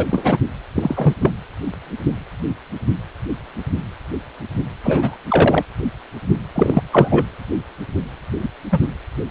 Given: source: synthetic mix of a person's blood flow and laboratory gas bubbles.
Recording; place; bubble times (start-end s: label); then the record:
Doppler ultrasound of blood flow; precordium
0.00-0.07 s: bubbles
0.10-0.38 s: bubbles
0.75-1.15 s: bubbles
1.21-1.30 s: bubbles
4.83-5.17 s: bubbles
5.29-5.63 s: bubbles
6.55-6.83 s: bubbles
6.91-7.25 s: bubbles
8.42-8.48 s: bubbles
8.71-8.79 s: bubbles
8.82-8.88 s: bubbles
From the record:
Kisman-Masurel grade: 223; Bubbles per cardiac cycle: several, 3 to 8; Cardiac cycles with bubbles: 10 to 50%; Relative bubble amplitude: loud (0.450 to 0.775); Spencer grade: 2 (many but less than half of the cardiac periods contain bubble signals, singularly or in groups); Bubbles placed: anywhere in the cardiac cycle